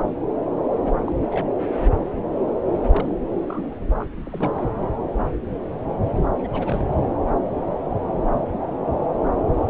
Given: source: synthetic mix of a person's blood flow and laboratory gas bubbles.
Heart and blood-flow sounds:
Doppler ultrasound of blood flow; subclavian vein
0.66-0.76 s: bubbles
0.85-0.91 s: bubbles
1.04-1.14 s: bubbles
1.21-1.28 s: bubbles
1.31-1.48 s: bubbles
2.89-3.12 s: bubbles
3.40-3.77 s: bubbles
3.99-4.06 s: bubbles
4.25-4.70 s: bubbles
6.38-6.47 s: bubbles
6.53-6.85 s: bubbles
From the record:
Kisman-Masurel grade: 221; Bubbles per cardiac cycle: several, 3 to 8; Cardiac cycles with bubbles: 10 to 50%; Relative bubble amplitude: barely perceptible (0.100 to 0.250); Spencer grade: 2 (many but less than half of the cardiac periods contain bubble signals, singularly or in groups); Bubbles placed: anywhere in the cardiac cycle

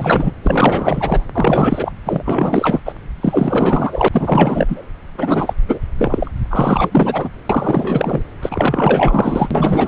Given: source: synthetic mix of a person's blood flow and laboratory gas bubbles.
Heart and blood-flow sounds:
Doppler ultrasound of blood flow; subclavian vein
0.00-0.33 s: bubbles
0.43-1.24 s: bubbles
1.34-1.93 s: bubbles
2.04-2.80 s: bubbles
2.85-2.93 s: bubbles
3.21-4.08 s: bubbles
4.11-4.86 s: bubbles
5.17-5.54 s: bubbles
5.67-5.79 s: bubbles
5.98-6.31 s: bubbles
6.50-7.29 s: bubbles
7.49-8.22 s: bubbles
8.41-9.88 s: bubbles
From the record:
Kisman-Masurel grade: 444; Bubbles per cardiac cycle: continuous sound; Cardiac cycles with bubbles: 100%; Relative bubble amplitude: maximal (0.775 to 0.999); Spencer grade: 4 (maximum detectable bubble signal sounding continuously throughout systole and diastole of every cardiac period, and overriding the amplitude of the normal cardiac signals); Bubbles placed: anywhere in the cardiac cycle

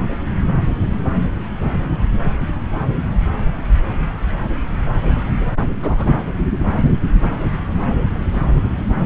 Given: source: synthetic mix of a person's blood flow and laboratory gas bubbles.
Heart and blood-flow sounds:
Doppler ultrasound of blood flow; subclavian vein
5.01-5.33 s: bubbles
5.40-5.46 s: bubbles
5.82-6.06 s: bubbles
From the record:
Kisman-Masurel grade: 222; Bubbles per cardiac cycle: several, 3 to 8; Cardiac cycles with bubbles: 10 to 50%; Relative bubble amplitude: moderate (0.250 to 0.450); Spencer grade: 2 (many but less than half of the cardiac periods contain bubble signals, singularly or in groups); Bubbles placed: anywhere in the cardiac cycle

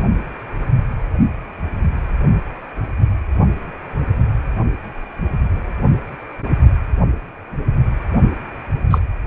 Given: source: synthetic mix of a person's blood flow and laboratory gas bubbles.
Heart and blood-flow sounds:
Doppler ultrasound of blood flow; precordium
8.90-8.98 s: bubbles
From the record:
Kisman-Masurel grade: 223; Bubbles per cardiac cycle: several, 3 to 8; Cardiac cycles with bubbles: 10 to 50%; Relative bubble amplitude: loud (0.450 to 0.775); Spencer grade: 2 (many but less than half of the cardiac periods contain bubble signals, singularly or in groups); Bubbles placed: only in the low amplitude regions of the cardiac cycle

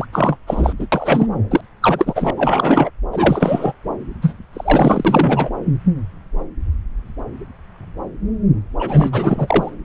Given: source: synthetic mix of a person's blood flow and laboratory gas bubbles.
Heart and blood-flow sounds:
Doppler ultrasound of blood flow; subclavian vein
0.00-0.06 s: bubbles
0.12-0.37 s: bubbles
0.47-0.73 s: bubbles
0.79-0.86 s: bubbles
0.92-1.27 s: bubbles
1.50-1.61 s: bubbles
1.81-2.31 s: bubbles
2.36-2.90 s: bubbles
3.11-3.72 s: bubbles
4.21-4.35 s: bubbles
4.53-5.50 s: bubbles
8.79-9.71 s: bubbles
From the record:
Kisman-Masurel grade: 333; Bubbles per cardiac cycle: rolling drumbeat, 9 or more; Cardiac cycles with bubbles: 50 to 99%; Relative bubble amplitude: loud (0.450 to 0.775); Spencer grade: 3 (all of the cardiac periods contain showers or single bubble signals, but not dominating or overriding the cardiac motion signals); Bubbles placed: anywhere in the cardiac cycle

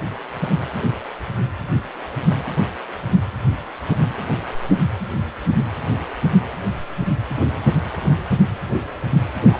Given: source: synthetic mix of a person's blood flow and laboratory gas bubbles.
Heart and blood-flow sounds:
Doppler ultrasound of blood flow; precordium
9.53-9.57 s: bubbles
From the record:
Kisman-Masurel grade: 212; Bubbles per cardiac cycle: several, 3 to 8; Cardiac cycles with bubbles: 1 to 10%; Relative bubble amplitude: moderate (0.250 to 0.450); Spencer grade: 1 (occasional bubble signal discernible with the cardiac motion signal, with majority of cardiac periods free of bubbles); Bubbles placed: anywhere in the cardiac cycle

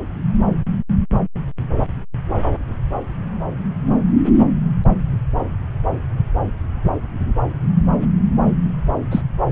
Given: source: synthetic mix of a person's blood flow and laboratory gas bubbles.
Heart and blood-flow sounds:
Doppler ultrasound of blood flow; subclavian vein
9.11-9.21 s: bubbles
From the record:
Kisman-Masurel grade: 113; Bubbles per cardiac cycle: 1 to 2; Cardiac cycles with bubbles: 1 to 10%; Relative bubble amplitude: loud (0.450 to 0.775); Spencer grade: 1 (occasional bubble signal discernible with the cardiac motion signal, with majority of cardiac periods free of bubbles); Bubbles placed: anywhere in the cardiac cycle

